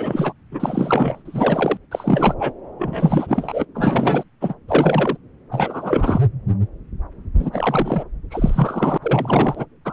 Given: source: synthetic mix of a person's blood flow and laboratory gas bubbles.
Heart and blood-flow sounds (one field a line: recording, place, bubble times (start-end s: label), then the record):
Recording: Doppler ultrasound of blood flow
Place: subclavian vein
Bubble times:
0.00-0.33 s: bubbles
0.51-1.22 s: bubbles
1.25-1.77 s: bubbles
1.91-2.34 s: bubbles
2.39-2.52 s: bubbles
2.79-3.65 s: bubbles
3.75-4.24 s: bubbles
4.41-4.54 s: bubbles
4.68-5.17 s: bubbles
5.51-6.21 s: bubbles
7.39-8.04 s: bubbles
8.30-8.97 s: bubbles
9.02-9.65 s: bubbles
9.85-9.93 s: bubbles
From the record:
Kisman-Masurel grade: 333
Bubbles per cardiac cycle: rolling drumbeat, 9 or more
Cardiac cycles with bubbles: 50 to 99%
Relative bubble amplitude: loud (0.450 to 0.775)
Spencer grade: 3 (all of the cardiac periods contain showers or single bubble signals, but not dominating or overriding the cardiac motion signals)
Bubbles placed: anywhere in the cardiac cycle